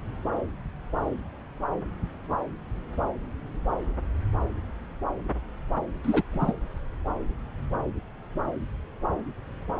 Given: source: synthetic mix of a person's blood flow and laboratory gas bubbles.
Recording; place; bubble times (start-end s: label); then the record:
Doppler ultrasound of blood flow; subclavian vein
6.03-6.23 s: bubbles
6.32-6.53 s: bubbles
From the record:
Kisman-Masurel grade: 222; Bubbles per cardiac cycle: several, 3 to 8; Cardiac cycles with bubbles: 10 to 50%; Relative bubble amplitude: moderate (0.250 to 0.450); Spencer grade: 2 (many but less than half of the cardiac periods contain bubble signals, singularly or in groups); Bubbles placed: anywhere in the cardiac cycle